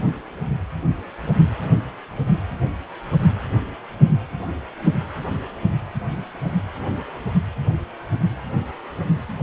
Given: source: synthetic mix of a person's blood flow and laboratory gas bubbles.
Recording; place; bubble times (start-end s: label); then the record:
Doppler ultrasound of blood flow; precordium
no bubbles
From the record:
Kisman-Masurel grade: 000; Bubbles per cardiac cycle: 0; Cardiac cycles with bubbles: 0%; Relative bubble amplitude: no bubbles discernible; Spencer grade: 0 (complete lack of bubble signals)